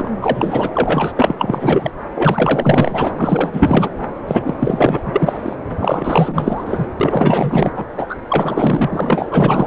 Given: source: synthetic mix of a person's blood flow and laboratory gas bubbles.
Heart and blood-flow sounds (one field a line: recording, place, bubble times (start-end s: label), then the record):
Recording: Doppler ultrasound of blood flow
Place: subclavian vein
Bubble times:
0.00-0.10 s: bubbles
0.21-0.69 s: bubbles
0.74-1.12 s: bubbles
1.16-1.35 s: bubbles
1.38-1.91 s: bubbles
2.15-3.12 s: bubbles
3.19-3.90 s: bubbles
4.27-4.42 s: bubbles
4.44-4.54 s: bubbles
4.59-5.56 s: bubbles
5.77-6.85 s: bubbles
7.00-7.71 s: bubbles
7.75-7.85 s: bubbles
7.97-8.06 s: bubbles
8.09-8.16 s: bubbles
8.29-9.67 s: bubbles
From the record:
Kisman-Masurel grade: 444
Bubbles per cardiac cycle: continuous sound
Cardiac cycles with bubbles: 100%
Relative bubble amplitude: maximal (0.775 to 0.999)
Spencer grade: 4 (maximum detectable bubble signal sounding continuously throughout systole and diastole of every cardiac period, and overriding the amplitude of the normal cardiac signals)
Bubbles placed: anywhere in the cardiac cycle